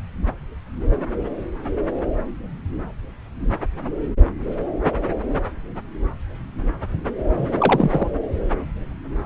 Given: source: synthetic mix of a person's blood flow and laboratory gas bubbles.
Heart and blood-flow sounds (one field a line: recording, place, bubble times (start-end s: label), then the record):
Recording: Doppler ultrasound of blood flow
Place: subclavian vein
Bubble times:
7.37-8.11 s: bubbles
From the record:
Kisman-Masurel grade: 212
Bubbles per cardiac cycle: several, 3 to 8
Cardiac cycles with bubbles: 1 to 10%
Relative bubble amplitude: moderate (0.250 to 0.450)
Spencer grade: 1 (occasional bubble signal discernible with the cardiac motion signal, with majority of cardiac periods free of bubbles)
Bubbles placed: anywhere in the cardiac cycle